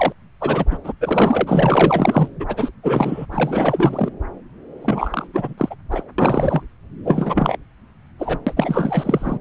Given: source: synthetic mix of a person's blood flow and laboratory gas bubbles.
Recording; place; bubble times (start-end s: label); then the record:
Doppler ultrasound of blood flow; subclavian vein
0.00-0.12 s: bubbles
0.40-0.65 s: bubbles
0.70-0.78 s: bubbles
0.84-0.92 s: bubbles
1.00-2.28 s: bubbles
2.40-2.71 s: bubbles
2.83-3.25 s: bubbles
3.31-4.10 s: bubbles
4.81-5.27 s: bubbles
5.33-5.54 s: bubbles
5.58-5.75 s: bubbles
5.91-6.04 s: bubbles
6.18-6.62 s: bubbles
7.04-7.56 s: bubbles
8.19-8.39 s: bubbles
8.47-9.38 s: bubbles
From the record:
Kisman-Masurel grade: 444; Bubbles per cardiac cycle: continuous sound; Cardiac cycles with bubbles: 100%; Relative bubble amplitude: maximal (0.775 to 0.999); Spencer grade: 4 (maximum detectable bubble signal sounding continuously throughout systole and diastole of every cardiac period, and overriding the amplitude of the normal cardiac signals); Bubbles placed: anywhere in the cardiac cycle